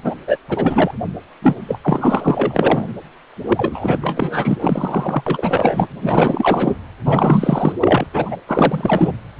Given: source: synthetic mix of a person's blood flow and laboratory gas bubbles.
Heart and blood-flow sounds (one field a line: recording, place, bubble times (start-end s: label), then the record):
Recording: Doppler ultrasound of blood flow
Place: precordium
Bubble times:
0.04-0.15 s: bubbles
0.27-0.38 s: bubbles
0.48-0.91 s: bubbles
1.42-1.55 s: bubbles
1.68-1.79 s: bubbles
1.84-3.00 s: bubbles
3.49-3.99 s: bubbles
4.01-4.58 s: bubbles
4.61-5.88 s: bubbles
6.02-6.75 s: bubbles
7.05-7.74 s: bubbles
7.80-8.06 s: bubbles
8.13-8.37 s: bubbles
8.47-9.12 s: bubbles
From the record:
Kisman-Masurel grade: 444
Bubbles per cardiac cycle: continuous sound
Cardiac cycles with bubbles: 100%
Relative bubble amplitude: maximal (0.775 to 0.999)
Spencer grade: 4 (maximum detectable bubble signal sounding continuously throughout systole and diastole of every cardiac period, and overriding the amplitude of the normal cardiac signals)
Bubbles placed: anywhere in the cardiac cycle